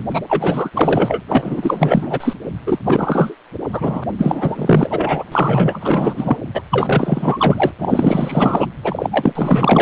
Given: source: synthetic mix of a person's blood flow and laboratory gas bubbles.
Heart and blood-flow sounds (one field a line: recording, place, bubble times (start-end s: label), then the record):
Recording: Doppler ultrasound of blood flow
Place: precordium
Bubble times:
0.11-0.21 s: bubbles
0.29-0.70 s: bubbles
0.74-1.21 s: bubbles
1.28-2.33 s: bubbles
2.66-2.79 s: bubbles
2.85-3.35 s: bubbles
3.72-4.04 s: bubbles
4.18-5.25 s: bubbles
5.32-6.37 s: bubbles
6.54-6.62 s: bubbles
6.71-7.71 s: bubbles
7.79-8.67 s: bubbles
8.82-9.82 s: bubbles
From the record:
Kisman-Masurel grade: 444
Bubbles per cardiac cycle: continuous sound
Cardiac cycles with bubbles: 100%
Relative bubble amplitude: maximal (0.775 to 0.999)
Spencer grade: 4 (maximum detectable bubble signal sounding continuously throughout systole and diastole of every cardiac period, and overriding the amplitude of the normal cardiac signals)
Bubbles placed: anywhere in the cardiac cycle